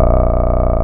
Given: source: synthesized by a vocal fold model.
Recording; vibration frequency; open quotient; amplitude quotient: sustained vowel; 30 Hz; 0.5; 1.1